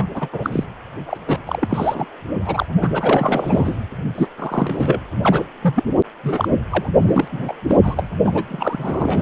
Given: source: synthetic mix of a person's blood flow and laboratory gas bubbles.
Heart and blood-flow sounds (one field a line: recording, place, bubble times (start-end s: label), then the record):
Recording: Doppler ultrasound of blood flow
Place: precordium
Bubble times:
0.00-0.06 s: bubbles
0.14-0.29 s: bubbles
0.33-0.65 s: bubbles
1.06-1.17 s: bubbles
1.27-1.39 s: bubbles
1.46-2.06 s: bubbles
2.45-2.66 s: bubbles
2.81-2.90 s: bubbles
2.94-3.80 s: bubbles
4.14-4.28 s: bubbles
4.38-5.01 s: bubbles
5.22-5.45 s: bubbles
5.62-5.84 s: bubbles
6.23-6.48 s: bubbles
6.71-6.88 s: bubbles
7.02-7.28 s: bubbles
7.32-7.53 s: bubbles
7.68-7.77 s: bubbles
7.83-8.08 s: bubbles
8.24-8.43 s: bubbles
8.48-9.22 s: bubbles
From the record:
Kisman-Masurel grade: 342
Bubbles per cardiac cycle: rolling drumbeat, 9 or more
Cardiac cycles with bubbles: 100%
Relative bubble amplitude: moderate (0.250 to 0.450)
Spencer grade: 3 (all of the cardiac periods contain showers or single bubble signals, but not dominating or overriding the cardiac motion signals)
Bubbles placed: only in the low amplitude regions of the cardiac cycle